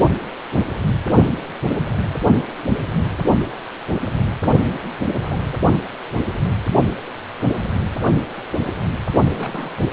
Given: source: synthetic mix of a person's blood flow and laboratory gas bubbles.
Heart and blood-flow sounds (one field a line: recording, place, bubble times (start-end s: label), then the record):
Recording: Doppler ultrasound of blood flow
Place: precordium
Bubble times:
4.67-4.72 s: bubbles
5.15-5.39 s: bubbles
5.50-5.57 s: bubbles
9.34-9.73 s: bubbles
From the record:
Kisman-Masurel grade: 221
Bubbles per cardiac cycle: several, 3 to 8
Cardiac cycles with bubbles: 10 to 50%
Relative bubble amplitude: barely perceptible (0.100 to 0.250)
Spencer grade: 2 (many but less than half of the cardiac periods contain bubble signals, singularly or in groups)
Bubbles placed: only in the low amplitude regions of the cardiac cycle